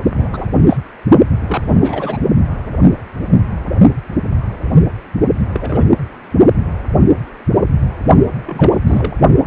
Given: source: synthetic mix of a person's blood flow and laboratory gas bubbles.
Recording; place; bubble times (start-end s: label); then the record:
Doppler ultrasound of blood flow; precordium
0.03-0.46 s: bubbles
0.66-0.78 s: bubbles
1.46-2.17 s: bubbles
5.48-5.83 s: bubbles
8.46-8.74 s: bubbles
8.87-9.14 s: bubbles
From the record:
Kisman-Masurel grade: 232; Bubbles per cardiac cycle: several, 3 to 8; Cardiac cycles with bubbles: 50 to 99%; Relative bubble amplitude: moderate (0.250 to 0.450); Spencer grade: 3 (all of the cardiac periods contain showers or single bubble signals, but not dominating or overriding the cardiac motion signals); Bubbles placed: only in the low amplitude regions of the cardiac cycle